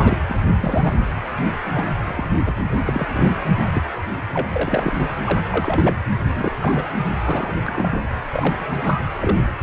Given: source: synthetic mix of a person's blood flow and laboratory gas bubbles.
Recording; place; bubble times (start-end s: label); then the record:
Doppler ultrasound of blood flow; precordium
0.00-0.18 s: bubbles
0.29-0.36 s: bubbles
0.60-0.97 s: bubbles
1.73-1.85 s: bubbles
2.05-2.54 s: bubbles
2.85-3.31 s: bubbles
3.73-3.83 s: bubbles
4.33-4.49 s: bubbles
4.54-4.93 s: bubbles
5.25-5.42 s: bubbles
5.51-6.03 s: bubbles
6.24-6.54 s: bubbles
6.59-6.85 s: bubbles
7.23-7.55 s: bubbles
7.61-8.02 s: bubbles
8.30-8.59 s: bubbles
8.83-9.01 s: bubbles
9.20-9.38 s: bubbles
9.59-9.63 s: bubbles
From the record:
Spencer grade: 3 (all of the cardiac periods contain showers or single bubble signals, but not dominating or overriding the cardiac motion signals); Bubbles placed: anywhere in the cardiac cycle